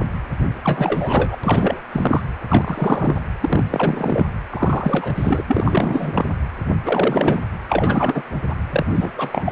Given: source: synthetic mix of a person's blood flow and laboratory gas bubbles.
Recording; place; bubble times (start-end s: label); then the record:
Doppler ultrasound of blood flow; precordium
0.63-1.37 s: bubbles
1.44-1.82 s: bubbles
1.92-2.21 s: bubbles
2.49-3.20 s: bubbles
3.40-3.64 s: bubbles
3.70-4.27 s: bubbles
4.50-5.43 s: bubbles
5.47-6.29 s: bubbles
6.85-7.40 s: bubbles
7.68-8.23 s: bubbles
8.49-8.55 s: bubbles
8.70-9.52 s: bubbles
From the record:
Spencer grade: 3 (all of the cardiac periods contain showers or single bubble signals, but not dominating or overriding the cardiac motion signals); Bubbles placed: anywhere in the cardiac cycle